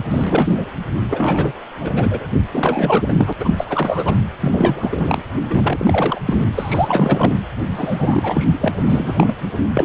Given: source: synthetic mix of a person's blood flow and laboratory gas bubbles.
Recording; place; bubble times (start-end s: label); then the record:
Doppler ultrasound of blood flow; precordium
0.10-0.65 s: bubbles
1.10-1.53 s: bubbles
1.79-2.27 s: bubbles
2.53-3.33 s: bubbles
3.39-3.66 s: bubbles
3.69-4.22 s: bubbles
4.41-5.22 s: bubbles
5.50-6.19 s: bubbles
6.25-6.38 s: bubbles
6.56-7.32 s: bubbles
7.76-8.47 s: bubbles
8.61-8.69 s: bubbles
8.86-9.36 s: bubbles
9.74-9.85 s: bubbles
From the record:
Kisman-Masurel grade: 333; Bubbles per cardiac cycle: rolling drumbeat, 9 or more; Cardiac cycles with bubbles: 50 to 99%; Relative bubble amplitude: loud (0.450 to 0.775); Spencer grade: 3 (all of the cardiac periods contain showers or single bubble signals, but not dominating or overriding the cardiac motion signals); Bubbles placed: anywhere in the cardiac cycle